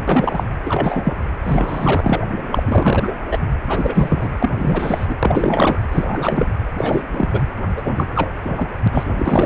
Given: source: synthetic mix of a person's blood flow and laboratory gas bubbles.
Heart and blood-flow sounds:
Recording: Doppler ultrasound of blood flow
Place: precordium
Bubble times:
0.07-0.44 s: bubbles
0.65-1.14 s: bubbles
1.43-2.23 s: bubbles
2.52-3.11 s: bubbles
3.30-3.38 s: bubbles
3.68-4.30 s: bubbles
4.39-4.51 s: bubbles
4.58-5.15 s: bubbles
5.23-5.79 s: bubbles
5.91-6.61 s: bubbles
6.77-7.02 s: bubbles
7.12-7.29 s: bubbles
7.33-7.43 s: bubbles
7.77-7.83 s: bubbles
7.85-7.93 s: bubbles
7.96-8.05 s: bubbles
8.15-8.30 s: bubbles
8.45-8.69 s: bubbles
8.83-8.88 s: bubbles
8.91-9.13 s: bubbles
9.18-9.46 s: bubbles
From the record:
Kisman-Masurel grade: 343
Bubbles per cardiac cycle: rolling drumbeat, 9 or more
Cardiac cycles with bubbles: 100%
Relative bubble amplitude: loud (0.450 to 0.775)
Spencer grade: 3 (all of the cardiac periods contain showers or single bubble signals, but not dominating or overriding the cardiac motion signals)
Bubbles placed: anywhere in the cardiac cycle

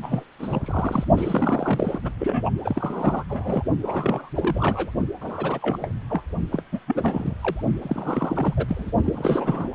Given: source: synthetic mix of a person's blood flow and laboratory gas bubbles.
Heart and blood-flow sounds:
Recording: Doppler ultrasound of blood flow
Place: precordium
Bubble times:
0.03-0.23 s: bubbles
0.39-1.04 s: bubbles
1.17-1.99 s: bubbles
2.03-2.12 s: bubbles
2.19-2.50 s: bubbles
2.59-3.24 s: bubbles
3.29-3.63 s: bubbles
3.81-4.29 s: bubbles
4.35-4.91 s: bubbles
5.21-5.59 s: bubbles
5.62-5.78 s: bubbles
5.80-5.92 s: bubbles
6.10-6.23 s: bubbles
6.52-6.62 s: bubbles
6.72-6.79 s: bubbles
6.87-7.35 s: bubbles
7.41-7.62 s: bubbles
7.82-8.54 s: bubbles
8.57-8.66 s: bubbles
8.68-8.91 s: bubbles
9.04-9.69 s: bubbles
From the record:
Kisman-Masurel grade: 342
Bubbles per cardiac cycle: rolling drumbeat, 9 or more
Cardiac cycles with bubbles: 100%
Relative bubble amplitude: moderate (0.250 to 0.450)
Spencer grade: 3 (all of the cardiac periods contain showers or single bubble signals, but not dominating or overriding the cardiac motion signals)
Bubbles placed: only in the low amplitude regions of the cardiac cycle

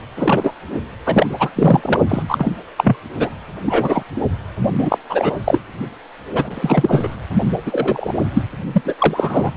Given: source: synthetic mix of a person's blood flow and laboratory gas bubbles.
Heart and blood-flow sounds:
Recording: Doppler ultrasound of blood flow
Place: precordium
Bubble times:
0.16-0.54 s: bubbles
1.05-1.26 s: bubbles
1.39-1.50 s: bubbles
1.55-2.00 s: bubbles
2.09-2.23 s: bubbles
2.28-2.51 s: bubbles
2.77-2.97 s: bubbles
3.19-3.30 s: bubbles
3.66-4.03 s: bubbles
4.78-4.98 s: bubbles
5.09-5.38 s: bubbles
5.44-5.61 s: bubbles
6.33-7.16 s: bubbles
7.66-8.13 s: bubbles
8.33-8.43 s: bubbles
8.72-8.81 s: bubbles
8.85-8.94 s: bubbles
8.98-9.52 s: bubbles
From the record:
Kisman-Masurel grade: 243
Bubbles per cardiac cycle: several, 3 to 8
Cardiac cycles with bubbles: 100%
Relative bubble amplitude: loud (0.450 to 0.775)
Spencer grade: 3 (all of the cardiac periods contain showers or single bubble signals, but not dominating or overriding the cardiac motion signals)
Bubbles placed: only in the low amplitude regions of the cardiac cycle

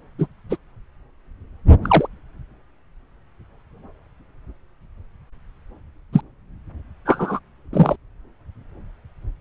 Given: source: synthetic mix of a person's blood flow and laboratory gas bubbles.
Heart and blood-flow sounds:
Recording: Doppler ultrasound of blood flow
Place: subclavian vein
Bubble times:
0.18-0.27 s: bubbles
0.49-0.56 s: bubbles
1.83-2.07 s: bubbles
6.12-6.21 s: bubbles
7.05-7.40 s: bubbles
7.73-7.96 s: bubbles
From the record:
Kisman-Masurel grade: 123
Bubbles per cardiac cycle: 1 to 2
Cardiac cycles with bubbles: 10 to 50%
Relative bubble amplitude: loud (0.450 to 0.775)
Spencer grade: 2 (many but less than half of the cardiac periods contain bubble signals, singularly or in groups)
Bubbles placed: anywhere in the cardiac cycle

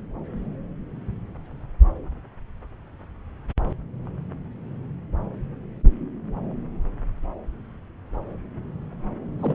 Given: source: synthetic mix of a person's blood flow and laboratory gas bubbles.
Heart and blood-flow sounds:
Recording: Doppler ultrasound of blood flow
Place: subclavian vein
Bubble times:
9.39-9.55 s: bubbles
From the record:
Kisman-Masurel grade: 221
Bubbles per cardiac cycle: several, 3 to 8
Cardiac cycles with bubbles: 10 to 50%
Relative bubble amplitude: barely perceptible (0.100 to 0.250)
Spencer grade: 2 (many but less than half of the cardiac periods contain bubble signals, singularly or in groups)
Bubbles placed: anywhere in the cardiac cycle

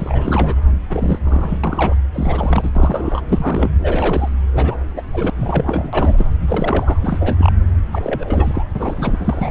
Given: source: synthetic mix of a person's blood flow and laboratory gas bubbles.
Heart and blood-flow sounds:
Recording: Doppler ultrasound of blood flow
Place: subclavian vein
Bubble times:
0.00-0.55 s: bubbles
0.89-1.19 s: bubbles
1.24-1.58 s: bubbles
1.64-1.96 s: bubbles
2.14-2.70 s: bubbles
2.75-3.22 s: bubbles
3.29-3.70 s: bubbles
3.82-4.29 s: bubbles
4.53-4.75 s: bubbles
4.94-5.02 s: bubbles
5.12-5.30 s: bubbles
5.40-6.29 s: bubbles
6.47-6.98 s: bubbles
7.00-7.52 s: bubbles
7.92-8.63 s: bubbles
8.75-9.51 s: bubbles
From the record:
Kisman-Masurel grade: 342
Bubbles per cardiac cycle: rolling drumbeat, 9 or more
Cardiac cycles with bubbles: 100%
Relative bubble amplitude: moderate (0.250 to 0.450)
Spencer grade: 3 (all of the cardiac periods contain showers or single bubble signals, but not dominating or overriding the cardiac motion signals)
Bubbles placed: anywhere in the cardiac cycle

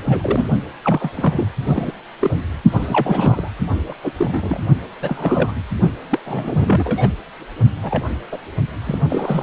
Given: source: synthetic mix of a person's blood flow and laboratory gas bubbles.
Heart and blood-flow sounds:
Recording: Doppler ultrasound of blood flow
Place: precordium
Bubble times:
0.05-0.43 s: bubbles
0.84-1.10 s: bubbles
1.16-1.47 s: bubbles
1.68-1.92 s: bubbles
2.21-2.40 s: bubbles
2.72-3.50 s: bubbles
3.88-3.94 s: bubbles
4.04-4.12 s: bubbles
4.17-4.59 s: bubbles
5.01-5.53 s: bubbles
6.09-6.19 s: bubbles
6.25-7.13 s: bubbles
7.82-8.04 s: bubbles
8.31-8.38 s: bubbles
8.84-8.98 s: bubbles
9.09-9.43 s: bubbles
From the record:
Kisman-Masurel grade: 242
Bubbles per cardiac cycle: several, 3 to 8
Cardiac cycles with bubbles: 100%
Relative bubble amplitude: moderate (0.250 to 0.450)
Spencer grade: 3 (all of the cardiac periods contain showers or single bubble signals, but not dominating or overriding the cardiac motion signals)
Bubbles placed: only in the low amplitude regions of the cardiac cycle

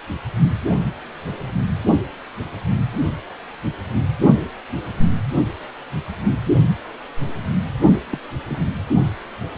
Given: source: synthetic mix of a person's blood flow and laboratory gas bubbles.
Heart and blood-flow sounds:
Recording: Doppler ultrasound of blood flow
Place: precordium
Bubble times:
8.10-8.19 s: bubbles
8.48-8.68 s: bubbles
From the record:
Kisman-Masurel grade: 111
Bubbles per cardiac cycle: 1 to 2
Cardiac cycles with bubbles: 1 to 10%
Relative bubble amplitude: barely perceptible (0.100 to 0.250)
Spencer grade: 1 (occasional bubble signal discernible with the cardiac motion signal, with majority of cardiac periods free of bubbles)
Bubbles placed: only in the low amplitude regions of the cardiac cycle

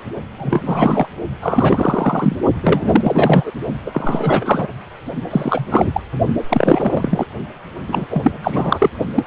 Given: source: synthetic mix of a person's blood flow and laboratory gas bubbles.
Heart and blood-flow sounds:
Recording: Doppler ultrasound of blood flow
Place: precordium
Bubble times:
0.38-0.62 s: bubbles
0.65-1.07 s: bubbles
1.42-2.37 s: bubbles
2.62-3.51 s: bubbles
3.85-4.67 s: bubbles
5.30-6.00 s: bubbles
6.48-7.26 s: bubbles
7.87-8.07 s: bubbles
8.10-8.32 s: bubbles
8.43-8.90 s: bubbles
9.15-9.26 s: bubbles
From the record:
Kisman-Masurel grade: 343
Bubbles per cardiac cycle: rolling drumbeat, 9 or more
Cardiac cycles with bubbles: 100%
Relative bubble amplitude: loud (0.450 to 0.775)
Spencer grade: 3 (all of the cardiac periods contain showers or single bubble signals, but not dominating or overriding the cardiac motion signals)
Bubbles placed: only in the low amplitude regions of the cardiac cycle

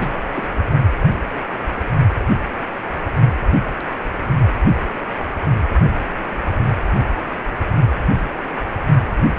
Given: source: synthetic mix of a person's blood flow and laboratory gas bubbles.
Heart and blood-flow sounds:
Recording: Doppler ultrasound of blood flow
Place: precordium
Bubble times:
0.00-0.47 s: bubbles
From the record:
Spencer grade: 1 (occasional bubble signal discernible with the cardiac motion signal, with majority of cardiac periods free of bubbles)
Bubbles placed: only in the low amplitude regions of the cardiac cycle

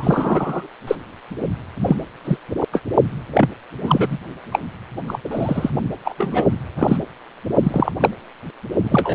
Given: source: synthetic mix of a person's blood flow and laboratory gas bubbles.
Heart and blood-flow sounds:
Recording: Doppler ultrasound of blood flow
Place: precordium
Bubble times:
0.00-0.69 s: bubbles
0.87-0.95 s: bubbles
1.85-1.96 s: bubbles
2.24-2.38 s: bubbles
2.73-2.81 s: bubbles
3.30-3.50 s: bubbles
3.80-4.17 s: bubbles
4.52-4.59 s: bubbles
5.07-5.19 s: bubbles
5.25-5.29 s: bubbles
5.31-5.70 s: bubbles
6.05-6.15 s: bubbles
6.18-6.47 s: bubbles
6.76-6.97 s: bubbles
7.63-7.92 s: bubbles
8.00-8.10 s: bubbles
8.83-9.15 s: bubbles
From the record:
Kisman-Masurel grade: 233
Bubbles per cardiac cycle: several, 3 to 8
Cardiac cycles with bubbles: 50 to 99%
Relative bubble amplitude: loud (0.450 to 0.775)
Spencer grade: 3 (all of the cardiac periods contain showers or single bubble signals, but not dominating or overriding the cardiac motion signals)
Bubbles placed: only in the low amplitude regions of the cardiac cycle

